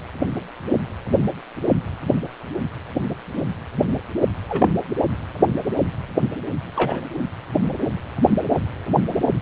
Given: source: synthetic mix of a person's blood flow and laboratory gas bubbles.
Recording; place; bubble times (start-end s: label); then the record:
Doppler ultrasound of blood flow; precordium
4.49-4.76 s: bubbles
6.76-7.04 s: bubbles
From the record:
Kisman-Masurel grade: 211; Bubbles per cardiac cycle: several, 3 to 8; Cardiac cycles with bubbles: 1 to 10%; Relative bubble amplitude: barely perceptible (0.100 to 0.250); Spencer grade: 1 (occasional bubble signal discernible with the cardiac motion signal, with majority of cardiac periods free of bubbles); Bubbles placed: anywhere in the cardiac cycle